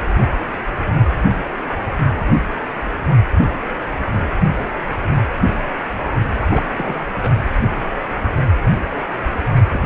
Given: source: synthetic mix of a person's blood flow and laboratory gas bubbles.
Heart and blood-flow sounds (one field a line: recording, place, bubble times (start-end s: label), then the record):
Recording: Doppler ultrasound of blood flow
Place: precordium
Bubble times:
0.00-0.04 s: bubbles
6.50-6.96 s: bubbles
7.15-7.42 s: bubbles
9.72-9.80 s: bubbles
From the record:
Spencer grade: 2 (many but less than half of the cardiac periods contain bubble signals, singularly or in groups)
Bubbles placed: anywhere in the cardiac cycle